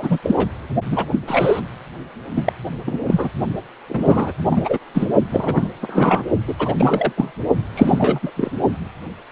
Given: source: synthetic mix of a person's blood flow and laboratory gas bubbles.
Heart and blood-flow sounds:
Doppler ultrasound of blood flow; precordium
0.00-0.18 s: bubbles
0.23-0.35 s: bubbles
0.38-0.47 s: bubbles
0.91-1.05 s: bubbles
1.10-1.19 s: bubbles
1.27-1.60 s: bubbles
2.35-2.52 s: bubbles
2.86-3.00 s: bubbles
3.06-3.29 s: bubbles
3.89-4.32 s: bubbles
4.49-4.78 s: bubbles
4.94-5.08 s: bubbles
5.30-5.69 s: bubbles
5.81-6.23 s: bubbles
6.47-6.55 s: bubbles
6.59-6.73 s: bubbles
6.77-7.13 s: bubbles
7.16-7.31 s: bubbles
7.75-8.20 s: bubbles
8.22-8.32 s: bubbles
8.36-8.52 s: bubbles
From the record:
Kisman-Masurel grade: 233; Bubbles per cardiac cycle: several, 3 to 8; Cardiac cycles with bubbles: 50 to 99%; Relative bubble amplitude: loud (0.450 to 0.775); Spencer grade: 3 (all of the cardiac periods contain showers or single bubble signals, but not dominating or overriding the cardiac motion signals); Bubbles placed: only in the low amplitude regions of the cardiac cycle

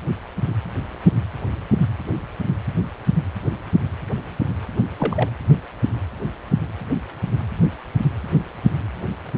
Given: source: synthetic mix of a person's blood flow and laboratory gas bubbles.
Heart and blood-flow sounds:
Doppler ultrasound of blood flow; precordium
4.97-5.29 s: bubbles
From the record:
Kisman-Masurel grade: 112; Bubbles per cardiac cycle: 1 to 2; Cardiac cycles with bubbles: 1 to 10%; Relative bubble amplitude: moderate (0.250 to 0.450); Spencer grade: 1 (occasional bubble signal discernible with the cardiac motion signal, with majority of cardiac periods free of bubbles); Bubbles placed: anywhere in the cardiac cycle

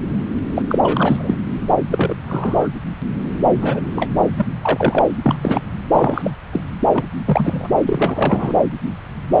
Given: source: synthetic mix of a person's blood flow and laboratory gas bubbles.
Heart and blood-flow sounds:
Doppler ultrasound of blood flow; subclavian vein
0.55-0.62 s: bubbles
0.66-1.35 s: bubbles
1.91-2.15 s: bubbles
2.27-2.69 s: bubbles
3.62-3.81 s: bubbles
3.95-4.08 s: bubbles
4.37-4.46 s: bubbles
4.62-5.04 s: bubbles
5.23-5.61 s: bubbles
5.93-6.30 s: bubbles
6.53-6.61 s: bubbles
6.94-7.06 s: bubbles
7.25-7.68 s: bubbles
7.86-8.54 s: bubbles
From the record:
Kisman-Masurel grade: 233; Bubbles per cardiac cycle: several, 3 to 8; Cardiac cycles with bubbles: 50 to 99%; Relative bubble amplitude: loud (0.450 to 0.775); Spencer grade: 3 (all of the cardiac periods contain showers or single bubble signals, but not dominating or overriding the cardiac motion signals); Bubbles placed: anywhere in the cardiac cycle

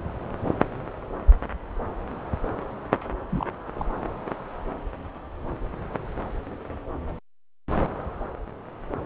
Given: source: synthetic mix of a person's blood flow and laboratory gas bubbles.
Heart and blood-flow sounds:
Doppler ultrasound of blood flow; subclavian vein
3.29-3.46 s: bubbles
3.73-3.91 s: bubbles
From the record:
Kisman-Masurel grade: 221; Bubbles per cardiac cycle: several, 3 to 8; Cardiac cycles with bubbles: 10 to 50%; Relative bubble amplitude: barely perceptible (0.100 to 0.250); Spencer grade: 2 (many but less than half of the cardiac periods contain bubble signals, singularly or in groups); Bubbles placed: anywhere in the cardiac cycle

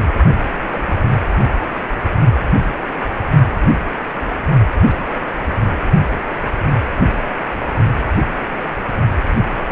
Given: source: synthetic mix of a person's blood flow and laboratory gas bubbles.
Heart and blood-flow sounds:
Doppler ultrasound of blood flow; precordium
0.00-0.14 s: bubbles
0.68-1.06 s: bubbles
4.71-5.18 s: bubbles
5.67-5.71 s: bubbles
From the record:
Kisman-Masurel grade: 121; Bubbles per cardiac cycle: 1 to 2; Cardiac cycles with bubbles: 10 to 50%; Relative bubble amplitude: barely perceptible (0.100 to 0.250); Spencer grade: 2 (many but less than half of the cardiac periods contain bubble signals, singularly or in groups); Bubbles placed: only in the low amplitude regions of the cardiac cycle

